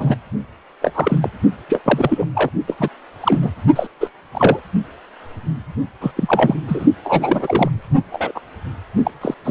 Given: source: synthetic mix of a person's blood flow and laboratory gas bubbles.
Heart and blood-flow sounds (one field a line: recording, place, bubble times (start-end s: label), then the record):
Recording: Doppler ultrasound of blood flow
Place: precordium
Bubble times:
0.00-0.15 s: bubbles
0.81-0.91 s: bubbles
0.94-1.18 s: bubbles
1.21-1.29 s: bubbles
1.69-1.80 s: bubbles
1.84-2.25 s: bubbles
2.35-2.50 s: bubbles
2.67-2.89 s: bubbles
3.21-3.51 s: bubbles
3.75-3.87 s: bubbles
4.00-4.10 s: bubbles
4.33-4.59 s: bubbles
6.00-6.12 s: bubbles
6.16-6.55 s: bubbles
6.67-6.86 s: bubbles
7.04-7.70 s: bubbles
8.12-8.31 s: bubbles
8.34-8.40 s: bubbles
9.04-9.11 s: bubbles
9.21-9.34 s: bubbles
9.44-9.51 s: bubbles
From the record:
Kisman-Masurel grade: 243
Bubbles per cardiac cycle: several, 3 to 8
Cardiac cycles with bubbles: 100%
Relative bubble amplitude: loud (0.450 to 0.775)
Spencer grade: 3 (all of the cardiac periods contain showers or single bubble signals, but not dominating or overriding the cardiac motion signals)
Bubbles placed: only in the low amplitude regions of the cardiac cycle